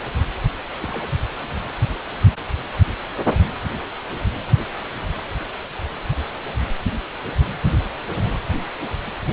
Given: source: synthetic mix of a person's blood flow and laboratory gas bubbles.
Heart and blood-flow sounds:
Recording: Doppler ultrasound of blood flow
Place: precordium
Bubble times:
0.80-1.08 s: bubbles
From the record:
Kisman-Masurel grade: 111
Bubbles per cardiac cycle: 1 to 2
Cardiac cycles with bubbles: 1 to 10%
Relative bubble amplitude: barely perceptible (0.100 to 0.250)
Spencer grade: 1 (occasional bubble signal discernible with the cardiac motion signal, with majority of cardiac periods free of bubbles)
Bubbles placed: anywhere in the cardiac cycle

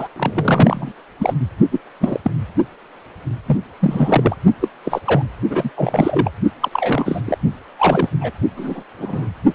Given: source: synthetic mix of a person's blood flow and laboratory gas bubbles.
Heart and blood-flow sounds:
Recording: Doppler ultrasound of blood flow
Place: precordium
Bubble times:
0.00-0.08 s: bubbles
0.16-0.92 s: bubbles
1.19-1.34 s: bubbles
1.71-1.80 s: bubbles
2.00-2.20 s: bubbles
2.23-2.31 s: bubbles
3.47-3.57 s: bubbles
3.80-4.36 s: bubbles
4.59-4.68 s: bubbles
4.85-5.00 s: bubbles
5.04-5.22 s: bubbles
5.49-5.70 s: bubbles
5.76-6.29 s: bubbles
6.60-6.69 s: bubbles
6.71-7.22 s: bubbles
7.25-7.38 s: bubbles
7.79-8.10 s: bubbles
8.21-8.31 s: bubbles
8.57-8.84 s: bubbles
8.99-9.28 s: bubbles
From the record:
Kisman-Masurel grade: 242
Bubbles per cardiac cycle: several, 3 to 8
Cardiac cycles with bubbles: 100%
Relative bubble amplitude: moderate (0.250 to 0.450)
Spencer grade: 3 (all of the cardiac periods contain showers or single bubble signals, but not dominating or overriding the cardiac motion signals)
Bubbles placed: only in the low amplitude regions of the cardiac cycle

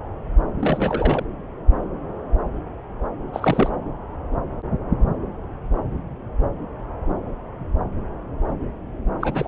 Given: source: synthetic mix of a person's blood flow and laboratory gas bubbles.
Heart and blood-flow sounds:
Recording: Doppler ultrasound of blood flow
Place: subclavian vein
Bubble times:
0.60-1.25 s: bubbles
3.33-3.70 s: bubbles
9.19-9.48 s: bubbles
From the record:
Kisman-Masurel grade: 222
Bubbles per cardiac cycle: several, 3 to 8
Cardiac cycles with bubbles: 10 to 50%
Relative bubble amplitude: moderate (0.250 to 0.450)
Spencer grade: 2 (many but less than half of the cardiac periods contain bubble signals, singularly or in groups)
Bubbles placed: anywhere in the cardiac cycle

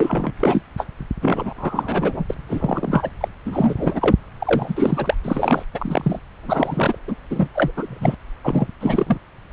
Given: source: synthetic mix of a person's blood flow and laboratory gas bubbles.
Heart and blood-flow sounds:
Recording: Doppler ultrasound of blood flow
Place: subclavian vein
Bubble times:
0.00-0.32 s: bubbles
0.39-0.62 s: bubbles
0.77-0.85 s: bubbles
1.21-1.54 s: bubbles
1.56-2.25 s: bubbles
2.29-2.35 s: bubbles
2.49-3.10 s: bubbles
3.21-3.28 s: bubbles
3.45-4.15 s: bubbles
4.38-5.14 s: bubbles
5.24-5.63 s: bubbles
5.73-6.19 s: bubbles
6.43-6.97 s: bubbles
7.07-7.15 s: bubbles
7.30-7.48 s: bubbles
7.54-7.71 s: bubbles
7.76-8.15 s: bubbles
8.44-8.68 s: bubbles
8.80-9.18 s: bubbles
From the record:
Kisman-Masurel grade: 343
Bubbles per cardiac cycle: rolling drumbeat, 9 or more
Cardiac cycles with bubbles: 100%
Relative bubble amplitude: loud (0.450 to 0.775)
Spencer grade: 3 (all of the cardiac periods contain showers or single bubble signals, but not dominating or overriding the cardiac motion signals)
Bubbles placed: anywhere in the cardiac cycle

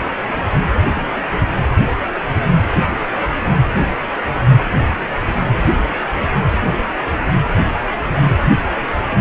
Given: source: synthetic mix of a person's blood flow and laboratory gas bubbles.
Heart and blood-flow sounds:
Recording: Doppler ultrasound of blood flow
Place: precordium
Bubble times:
0.92-1.08 s: bubbles
From the record:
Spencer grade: 1 (occasional bubble signal discernible with the cardiac motion signal, with majority of cardiac periods free of bubbles)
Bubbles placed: anywhere in the cardiac cycle

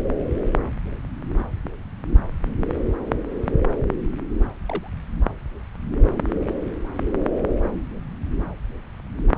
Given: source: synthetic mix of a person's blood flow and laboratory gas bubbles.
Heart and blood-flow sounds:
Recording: Doppler ultrasound of blood flow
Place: subclavian vein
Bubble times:
4.69-4.88 s: bubbles
From the record:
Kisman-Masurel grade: 111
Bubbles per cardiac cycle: 1 to 2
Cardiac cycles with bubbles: 1 to 10%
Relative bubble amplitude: barely perceptible (0.100 to 0.250)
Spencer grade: 1 (occasional bubble signal discernible with the cardiac motion signal, with majority of cardiac periods free of bubbles)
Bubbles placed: anywhere in the cardiac cycle

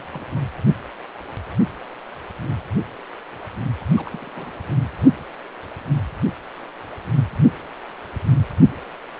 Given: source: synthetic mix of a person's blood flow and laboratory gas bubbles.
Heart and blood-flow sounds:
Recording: Doppler ultrasound of blood flow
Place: precordium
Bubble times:
0.00-0.07 s: bubbles
0.11-0.41 s: bubbles
3.79-3.87 s: bubbles
3.96-4.09 s: bubbles
4.12-4.29 s: bubbles
4.36-4.66 s: bubbles
From the record:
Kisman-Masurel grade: 221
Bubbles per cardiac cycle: several, 3 to 8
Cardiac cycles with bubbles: 10 to 50%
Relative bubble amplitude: barely perceptible (0.100 to 0.250)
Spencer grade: 2 (many but less than half of the cardiac periods contain bubble signals, singularly or in groups)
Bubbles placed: anywhere in the cardiac cycle

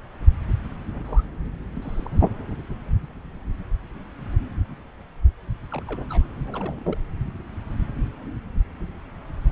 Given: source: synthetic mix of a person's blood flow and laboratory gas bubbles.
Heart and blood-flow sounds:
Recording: Doppler ultrasound of blood flow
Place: subclavian vein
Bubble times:
0.92-1.24 s: bubbles
1.74-2.33 s: bubbles
2.51-2.58 s: bubbles
5.71-5.83 s: bubbles
5.87-6.03 s: bubbles
6.09-6.25 s: bubbles
6.45-6.98 s: bubbles
From the record:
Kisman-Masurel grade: 221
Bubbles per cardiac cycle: several, 3 to 8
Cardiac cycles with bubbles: 10 to 50%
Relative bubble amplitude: barely perceptible (0.100 to 0.250)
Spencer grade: 2 (many but less than half of the cardiac periods contain bubble signals, singularly or in groups)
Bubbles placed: anywhere in the cardiac cycle

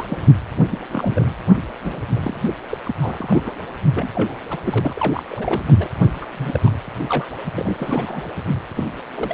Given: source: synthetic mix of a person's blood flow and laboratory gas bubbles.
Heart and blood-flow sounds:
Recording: Doppler ultrasound of blood flow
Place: precordium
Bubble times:
0.00-0.18 s: bubbles
0.56-0.79 s: bubbles
0.92-1.30 s: bubbles
1.83-2.02 s: bubbles
2.12-2.56 s: bubbles
2.69-2.77 s: bubbles
2.85-2.94 s: bubbles
3.01-3.53 s: bubbles
3.95-4.12 s: bubbles
4.14-4.33 s: bubbles
4.50-4.58 s: bubbles
4.64-5.23 s: bubbles
5.28-5.62 s: bubbles
5.67-5.72 s: bubbles
5.78-5.88 s: bubbles
6.21-6.27 s: bubbles
6.38-6.70 s: bubbles
6.99-7.05 s: bubbles
7.09-7.25 s: bubbles
7.54-8.22 s: bubbles
8.75-8.88 s: bubbles
9.15-9.34 s: bubbles
From the record:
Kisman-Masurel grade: 242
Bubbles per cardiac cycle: several, 3 to 8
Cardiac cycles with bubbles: 100%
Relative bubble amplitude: moderate (0.250 to 0.450)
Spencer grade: 3 (all of the cardiac periods contain showers or single bubble signals, but not dominating or overriding the cardiac motion signals)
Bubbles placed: anywhere in the cardiac cycle

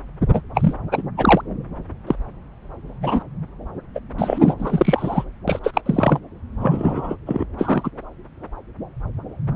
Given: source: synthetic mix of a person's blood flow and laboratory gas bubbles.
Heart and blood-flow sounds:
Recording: Doppler ultrasound of blood flow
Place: subclavian vein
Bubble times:
0.33-0.42 s: bubbles
0.54-0.74 s: bubbles
0.91-1.02 s: bubbles
1.17-1.42 s: bubbles
2.06-2.15 s: bubbles
3.01-3.23 s: bubbles
3.94-4.00 s: bubbles
4.18-4.54 s: bubbles
4.59-5.24 s: bubbles
5.47-5.59 s: bubbles
5.63-5.81 s: bubbles
5.85-6.19 s: bubbles
6.60-7.16 s: bubbles
7.26-7.44 s: bubbles
7.58-7.91 s: bubbles
From the record:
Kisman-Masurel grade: 233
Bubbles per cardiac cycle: several, 3 to 8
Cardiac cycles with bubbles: 50 to 99%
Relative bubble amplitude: loud (0.450 to 0.775)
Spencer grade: 3 (all of the cardiac periods contain showers or single bubble signals, but not dominating or overriding the cardiac motion signals)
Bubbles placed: anywhere in the cardiac cycle

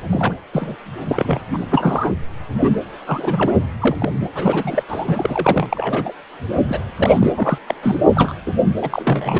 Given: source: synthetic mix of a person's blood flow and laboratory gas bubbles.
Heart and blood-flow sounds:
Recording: Doppler ultrasound of blood flow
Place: precordium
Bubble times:
0.11-0.34 s: bubbles
0.53-0.77 s: bubbles
1.07-1.40 s: bubbles
1.51-1.59 s: bubbles
1.61-1.64 s: bubbles
1.70-2.12 s: bubbles
2.58-2.71 s: bubbles
3.06-3.52 s: bubbles
3.81-3.96 s: bubbles
3.98-4.12 s: bubbles
4.34-4.83 s: bubbles
4.88-5.05 s: bubbles
5.08-5.66 s: bubbles
5.70-6.13 s: bubbles
6.67-6.83 s: bubbles
6.97-7.33 s: bubbles
7.36-7.58 s: bubbles
7.67-7.74 s: bubbles
7.82-7.96 s: bubbles
8.14-8.32 s: bubbles
8.46-8.53 s: bubbles
8.81-9.40 s: bubbles
From the record:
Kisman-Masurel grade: 242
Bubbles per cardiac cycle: several, 3 to 8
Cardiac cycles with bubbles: 100%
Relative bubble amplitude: moderate (0.250 to 0.450)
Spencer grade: 3 (all of the cardiac periods contain showers or single bubble signals, but not dominating or overriding the cardiac motion signals)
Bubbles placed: anywhere in the cardiac cycle

